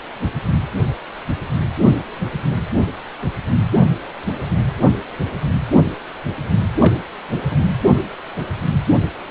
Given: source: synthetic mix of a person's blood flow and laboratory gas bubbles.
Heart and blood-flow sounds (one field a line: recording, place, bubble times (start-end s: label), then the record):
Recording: Doppler ultrasound of blood flow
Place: precordium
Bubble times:
6.80-6.97 s: bubbles
7.50-7.56 s: bubbles
From the record:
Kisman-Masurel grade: 111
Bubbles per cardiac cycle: 1 to 2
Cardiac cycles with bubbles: 1 to 10%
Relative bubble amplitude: barely perceptible (0.100 to 0.250)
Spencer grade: 1 (occasional bubble signal discernible with the cardiac motion signal, with majority of cardiac periods free of bubbles)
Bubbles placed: anywhere in the cardiac cycle